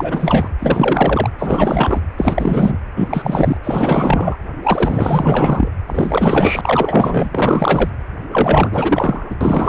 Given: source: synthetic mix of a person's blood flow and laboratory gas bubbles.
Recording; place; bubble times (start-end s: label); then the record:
Doppler ultrasound of blood flow; precordium
0.00-0.49 s: bubbles
0.59-1.30 s: bubbles
1.39-2.01 s: bubbles
2.18-2.78 s: bubbles
2.96-3.58 s: bubbles
3.64-4.36 s: bubbles
4.62-5.69 s: bubbles
5.87-7.90 s: bubbles
8.31-9.35 s: bubbles
9.40-9.68 s: bubbles
From the record:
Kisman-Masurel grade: 444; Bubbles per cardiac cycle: continuous sound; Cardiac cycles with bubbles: 100%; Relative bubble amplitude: maximal (0.775 to 0.999); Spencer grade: 4 (maximum detectable bubble signal sounding continuously throughout systole and diastole of every cardiac period, and overriding the amplitude of the normal cardiac signals); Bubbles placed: anywhere in the cardiac cycle